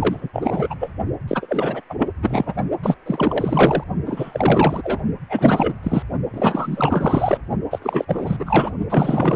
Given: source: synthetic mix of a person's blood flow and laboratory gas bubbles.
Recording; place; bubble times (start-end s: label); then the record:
Doppler ultrasound of blood flow; precordium
0.00-0.29 s: bubbles
0.33-0.75 s: bubbles
0.79-0.91 s: bubbles
1.27-1.81 s: bubbles
1.89-1.95 s: bubbles
1.98-2.08 s: bubbles
2.22-2.54 s: bubbles
2.83-2.96 s: bubbles
3.06-3.83 s: bubbles
4.06-5.01 s: bubbles
5.29-5.74 s: bubbles
5.83-6.03 s: bubbles
6.33-7.38 s: bubbles
7.71-7.79 s: bubbles
7.82-8.37 s: bubbles
8.39-8.72 s: bubbles
8.89-9.36 s: bubbles
From the record:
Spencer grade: 4 (maximum detectable bubble signal sounding continuously throughout systole and diastole of every cardiac period, and overriding the amplitude of the normal cardiac signals); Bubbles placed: only in the low amplitude regions of the cardiac cycle